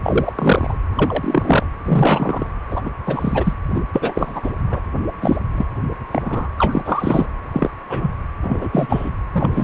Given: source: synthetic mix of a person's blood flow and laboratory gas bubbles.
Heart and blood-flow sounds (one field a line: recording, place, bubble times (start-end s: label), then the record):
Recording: Doppler ultrasound of blood flow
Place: precordium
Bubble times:
0.03-0.33 s: bubbles
0.35-0.77 s: bubbles
0.96-1.66 s: bubbles
1.84-2.47 s: bubbles
2.71-2.81 s: bubbles
2.85-2.91 s: bubbles
3.06-3.53 s: bubbles
3.74-3.81 s: bubbles
3.93-4.51 s: bubbles
4.70-4.80 s: bubbles
5.21-5.36 s: bubbles
5.52-5.65 s: bubbles
6.11-6.22 s: bubbles
6.25-6.48 s: bubbles
6.58-6.82 s: bubbles
6.85-7.26 s: bubbles
7.52-7.70 s: bubbles
7.89-8.11 s: bubbles
8.42-8.70 s: bubbles
8.73-9.11 s: bubbles
9.34-9.63 s: bubbles
From the record:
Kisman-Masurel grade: 243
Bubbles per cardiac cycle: several, 3 to 8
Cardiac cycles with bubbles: 100%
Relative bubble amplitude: loud (0.450 to 0.775)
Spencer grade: 3 (all of the cardiac periods contain showers or single bubble signals, but not dominating or overriding the cardiac motion signals)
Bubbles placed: anywhere in the cardiac cycle